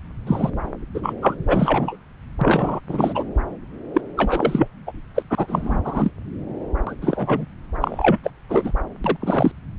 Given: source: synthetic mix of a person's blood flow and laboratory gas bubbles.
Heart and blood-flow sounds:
Doppler ultrasound of blood flow; subclavian vein
0.27-0.50 s: bubbles
0.94-1.14 s: bubbles
1.21-1.34 s: bubbles
1.47-1.97 s: bubbles
2.41-2.80 s: bubbles
2.89-3.24 s: bubbles
3.94-4.01 s: bubbles
4.17-4.67 s: bubbles
4.86-4.92 s: bubbles
5.14-5.22 s: bubbles
5.30-5.80 s: bubbles
5.84-6.11 s: bubbles
6.86-6.94 s: bubbles
7.01-7.45 s: bubbles
7.81-8.19 s: bubbles
8.24-8.30 s: bubbles
8.49-8.71 s: bubbles
9.04-9.17 s: bubbles
9.20-9.52 s: bubbles
From the record:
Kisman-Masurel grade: 233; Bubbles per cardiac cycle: several, 3 to 8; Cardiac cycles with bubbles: 50 to 99%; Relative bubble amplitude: loud (0.450 to 0.775); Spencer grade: 3 (all of the cardiac periods contain showers or single bubble signals, but not dominating or overriding the cardiac motion signals); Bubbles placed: anywhere in the cardiac cycle

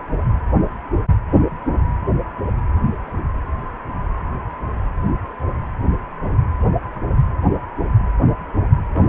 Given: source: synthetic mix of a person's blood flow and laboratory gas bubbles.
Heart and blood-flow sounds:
Doppler ultrasound of blood flow; precordium
8.93-9.09 s: bubbles
From the record:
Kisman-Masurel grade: 111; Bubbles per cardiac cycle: 1 to 2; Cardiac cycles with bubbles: 1 to 10%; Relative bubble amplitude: barely perceptible (0.100 to 0.250); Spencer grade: 1 (occasional bubble signal discernible with the cardiac motion signal, with majority of cardiac periods free of bubbles); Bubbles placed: anywhere in the cardiac cycle

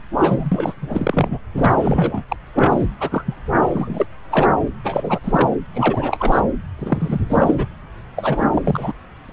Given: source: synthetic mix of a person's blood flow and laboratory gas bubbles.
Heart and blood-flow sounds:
Doppler ultrasound of blood flow; subclavian vein
0.19-0.73 s: bubbles
0.82-1.39 s: bubbles
1.56-2.23 s: bubbles
2.28-2.36 s: bubbles
2.54-2.85 s: bubbles
3.00-3.35 s: bubbles
3.59-4.05 s: bubbles
4.30-4.48 s: bubbles
4.83-5.19 s: bubbles
5.23-5.57 s: bubbles
5.73-6.42 s: bubbles
6.78-7.20 s: bubbles
7.29-7.66 s: bubbles
8.16-8.50 s: bubbles
8.54-8.92 s: bubbles
9.29-9.33 s: bubbles
From the record:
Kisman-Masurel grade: 342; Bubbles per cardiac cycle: rolling drumbeat, 9 or more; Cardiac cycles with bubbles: 100%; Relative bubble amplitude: moderate (0.250 to 0.450); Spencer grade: 3 (all of the cardiac periods contain showers or single bubble signals, but not dominating or overriding the cardiac motion signals); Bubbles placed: anywhere in the cardiac cycle

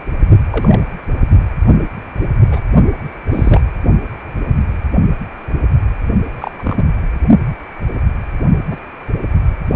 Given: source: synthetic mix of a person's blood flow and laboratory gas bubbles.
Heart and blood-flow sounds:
Doppler ultrasound of blood flow; precordium
0.50-0.81 s: bubbles
2.47-2.60 s: bubbles
3.32-3.60 s: bubbles
6.31-6.85 s: bubbles
8.70-8.78 s: bubbles
From the record:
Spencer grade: 2 (many but less than half of the cardiac periods contain bubble signals, singularly or in groups); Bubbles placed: only in the low amplitude regions of the cardiac cycle

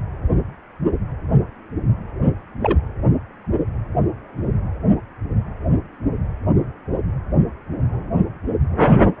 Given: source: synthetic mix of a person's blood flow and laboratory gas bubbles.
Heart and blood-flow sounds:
Doppler ultrasound of blood flow; precordium
2.60-2.78 s: bubbles
From the record:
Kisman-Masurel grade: 112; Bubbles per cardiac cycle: 1 to 2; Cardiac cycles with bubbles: 1 to 10%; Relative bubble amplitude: moderate (0.250 to 0.450); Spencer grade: 1 (occasional bubble signal discernible with the cardiac motion signal, with majority of cardiac periods free of bubbles); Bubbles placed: anywhere in the cardiac cycle

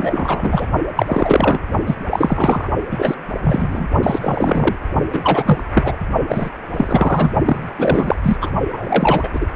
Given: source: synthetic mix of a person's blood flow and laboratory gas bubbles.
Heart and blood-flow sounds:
Doppler ultrasound of blood flow; precordium
0.00-0.67 s: bubbles
0.95-1.60 s: bubbles
1.86-1.96 s: bubbles
2.09-2.68 s: bubbles
2.91-3.15 s: bubbles
3.44-3.88 s: bubbles
4.03-4.76 s: bubbles
5.12-5.64 s: bubbles
5.75-5.97 s: bubbles
6.28-6.50 s: bubbles
6.73-7.33 s: bubbles
7.45-7.72 s: bubbles
7.78-8.16 s: bubbles
8.23-8.37 s: bubbles
8.41-8.50 s: bubbles
8.72-9.29 s: bubbles
9.32-9.46 s: bubbles
From the record:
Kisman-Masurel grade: 333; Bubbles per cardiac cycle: rolling drumbeat, 9 or more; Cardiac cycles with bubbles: 50 to 99%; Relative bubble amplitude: loud (0.450 to 0.775); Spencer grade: 3 (all of the cardiac periods contain showers or single bubble signals, but not dominating or overriding the cardiac motion signals); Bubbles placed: only in the low amplitude regions of the cardiac cycle

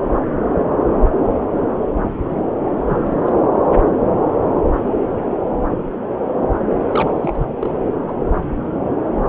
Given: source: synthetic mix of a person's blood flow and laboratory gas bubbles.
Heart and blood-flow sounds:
Doppler ultrasound of blood flow; subclavian vein
2.88-3.33 s: bubbles
6.90-7.54 s: bubbles
7.59-7.69 s: bubbles
8.07-8.13 s: bubbles
From the record:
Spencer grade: 2 (many but less than half of the cardiac periods contain bubble signals, singularly or in groups); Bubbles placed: anywhere in the cardiac cycle

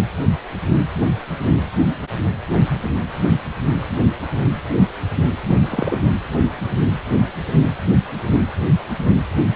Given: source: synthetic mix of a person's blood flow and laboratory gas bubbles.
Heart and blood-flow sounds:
Doppler ultrasound of blood flow; precordium
5.48-5.56 s: bubbles
5.59-6.11 s: bubbles
From the record:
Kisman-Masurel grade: 212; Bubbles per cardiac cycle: several, 3 to 8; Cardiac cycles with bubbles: 1 to 10%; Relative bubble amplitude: moderate (0.250 to 0.450); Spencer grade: 1 (occasional bubble signal discernible with the cardiac motion signal, with majority of cardiac periods free of bubbles); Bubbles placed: anywhere in the cardiac cycle

